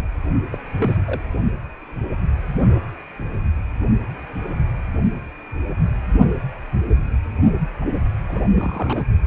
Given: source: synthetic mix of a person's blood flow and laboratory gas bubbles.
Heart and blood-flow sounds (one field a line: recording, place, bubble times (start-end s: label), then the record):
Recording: Doppler ultrasound of blood flow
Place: precordium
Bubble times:
0.52-0.57 s: bubbles
0.78-0.97 s: bubbles
1.06-1.22 s: bubbles
7.81-7.86 s: bubbles
8.29-8.42 s: bubbles
8.55-9.05 s: bubbles
From the record:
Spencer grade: 2 (many but less than half of the cardiac periods contain bubble signals, singularly or in groups)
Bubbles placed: only in the low amplitude regions of the cardiac cycle